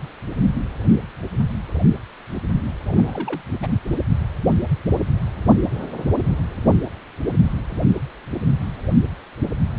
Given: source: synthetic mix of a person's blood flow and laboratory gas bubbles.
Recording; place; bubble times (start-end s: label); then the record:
Doppler ultrasound of blood flow; precordium
2.85-3.42 s: bubbles
3.62-3.67 s: bubbles
From the record:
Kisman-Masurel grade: 221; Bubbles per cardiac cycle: several, 3 to 8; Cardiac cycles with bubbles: 10 to 50%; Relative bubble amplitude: barely perceptible (0.100 to 0.250); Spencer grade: 2 (many but less than half of the cardiac periods contain bubble signals, singularly or in groups); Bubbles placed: anywhere in the cardiac cycle